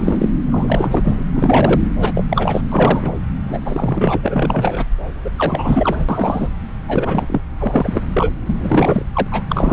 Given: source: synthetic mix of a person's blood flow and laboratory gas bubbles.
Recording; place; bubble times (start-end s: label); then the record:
Doppler ultrasound of blood flow; subclavian vein
0.00-0.29 s: bubbles
0.45-1.24 s: bubbles
1.32-1.81 s: bubbles
2.00-2.23 s: bubbles
2.29-2.61 s: bubbles
2.71-3.12 s: bubbles
3.49-3.58 s: bubbles
3.65-4.17 s: bubbles
4.22-4.85 s: bubbles
5.24-5.30 s: bubbles
5.36-6.06 s: bubbles
6.08-6.48 s: bubbles
6.88-7.41 s: bubbles
7.58-8.02 s: bubbles
8.13-8.30 s: bubbles
8.47-9.05 s: bubbles
9.13-9.27 s: bubbles
9.31-9.43 s: bubbles
9.49-9.73 s: bubbles
From the record:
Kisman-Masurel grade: 343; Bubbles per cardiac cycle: rolling drumbeat, 9 or more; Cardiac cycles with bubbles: 100%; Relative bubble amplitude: loud (0.450 to 0.775); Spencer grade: 3 (all of the cardiac periods contain showers or single bubble signals, but not dominating or overriding the cardiac motion signals); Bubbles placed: anywhere in the cardiac cycle